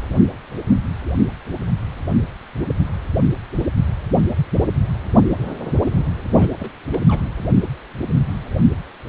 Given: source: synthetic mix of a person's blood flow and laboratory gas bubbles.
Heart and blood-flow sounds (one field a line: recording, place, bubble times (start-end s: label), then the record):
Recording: Doppler ultrasound of blood flow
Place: precordium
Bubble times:
6.38-6.48 s: bubbles
6.58-6.71 s: bubbles
6.92-6.99 s: bubbles
7.08-7.21 s: bubbles
From the record:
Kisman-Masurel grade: 211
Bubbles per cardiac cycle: several, 3 to 8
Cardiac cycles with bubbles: 1 to 10%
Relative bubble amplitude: barely perceptible (0.100 to 0.250)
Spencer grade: 1 (occasional bubble signal discernible with the cardiac motion signal, with majority of cardiac periods free of bubbles)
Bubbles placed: anywhere in the cardiac cycle